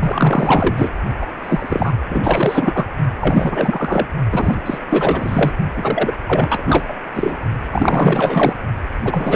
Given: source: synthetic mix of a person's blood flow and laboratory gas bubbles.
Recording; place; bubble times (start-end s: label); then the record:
Doppler ultrasound of blood flow; precordium
0.00-0.92 s: bubbles
1.21-1.26 s: bubbles
1.44-1.93 s: bubbles
2.10-2.87 s: bubbles
3.20-4.07 s: bubbles
4.32-4.79 s: bubbles
4.89-5.51 s: bubbles
5.77-6.15 s: bubbles
6.26-6.86 s: bubbles
6.88-6.94 s: bubbles
7.14-7.37 s: bubbles
7.71-8.54 s: bubbles
9.04-9.36 s: bubbles
From the record:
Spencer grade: 4 (maximum detectable bubble signal sounding continuously throughout systole and diastole of every cardiac period, and overriding the amplitude of the normal cardiac signals); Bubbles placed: only in the low amplitude regions of the cardiac cycle